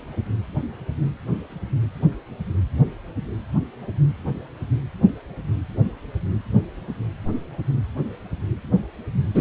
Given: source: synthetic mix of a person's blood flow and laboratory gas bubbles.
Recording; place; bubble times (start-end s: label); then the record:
Doppler ultrasound of blood flow; precordium
9.34-9.41 s: bubbles
From the record:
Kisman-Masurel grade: 213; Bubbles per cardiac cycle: several, 3 to 8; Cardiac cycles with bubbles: 1 to 10%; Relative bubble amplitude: loud (0.450 to 0.775); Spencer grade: 1 (occasional bubble signal discernible with the cardiac motion signal, with majority of cardiac periods free of bubbles); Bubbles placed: anywhere in the cardiac cycle